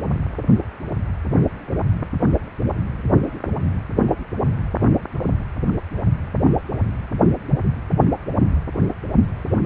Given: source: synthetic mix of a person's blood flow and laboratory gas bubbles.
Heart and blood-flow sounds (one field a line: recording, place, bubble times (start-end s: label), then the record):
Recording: Doppler ultrasound of blood flow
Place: precordium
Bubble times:
no bubbles
From the record:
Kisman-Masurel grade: 000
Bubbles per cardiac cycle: 0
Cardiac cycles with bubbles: 0%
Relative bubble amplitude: no bubbles discernible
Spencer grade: 0 (complete lack of bubble signals)